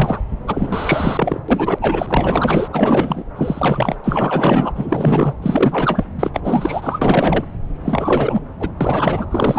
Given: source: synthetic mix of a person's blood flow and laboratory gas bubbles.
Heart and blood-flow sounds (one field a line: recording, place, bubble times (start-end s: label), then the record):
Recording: Doppler ultrasound of blood flow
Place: subclavian vein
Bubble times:
0.00-0.21 s: bubbles
0.47-1.40 s: bubbles
1.48-2.69 s: bubbles
2.73-3.24 s: bubbles
3.35-3.96 s: bubbles
4.04-4.72 s: bubbles
4.75-5.33 s: bubbles
5.42-6.04 s: bubbles
6.19-6.31 s: bubbles
6.33-7.44 s: bubbles
7.82-8.43 s: bubbles
8.60-8.69 s: bubbles
8.80-9.27 s: bubbles
9.30-9.59 s: bubbles
From the record:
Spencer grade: 4 (maximum detectable bubble signal sounding continuously throughout systole and diastole of every cardiac period, and overriding the amplitude of the normal cardiac signals)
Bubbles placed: anywhere in the cardiac cycle